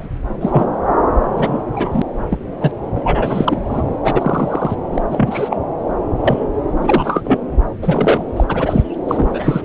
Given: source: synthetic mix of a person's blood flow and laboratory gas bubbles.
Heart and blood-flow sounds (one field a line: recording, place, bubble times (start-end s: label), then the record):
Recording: Doppler ultrasound of blood flow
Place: subclavian vein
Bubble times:
0.00-0.08 s: bubbles
0.41-0.66 s: bubbles
1.35-1.62 s: bubbles
1.73-2.02 s: bubbles
2.29-2.38 s: bubbles
2.60-2.72 s: bubbles
2.94-3.00 s: bubbles
3.02-3.62 s: bubbles
3.66-3.84 s: bubbles
4.03-4.76 s: bubbles
4.92-5.00 s: bubbles
5.10-5.57 s: bubbles
6.17-6.45 s: bubbles
6.80-7.39 s: bubbles
7.81-8.26 s: bubbles
8.36-8.44 s: bubbles
8.48-8.82 s: bubbles
9.05-9.62 s: bubbles
From the record:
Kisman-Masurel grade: 243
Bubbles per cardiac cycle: several, 3 to 8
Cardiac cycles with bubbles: 100%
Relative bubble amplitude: loud (0.450 to 0.775)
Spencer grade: 3 (all of the cardiac periods contain showers or single bubble signals, but not dominating or overriding the cardiac motion signals)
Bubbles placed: anywhere in the cardiac cycle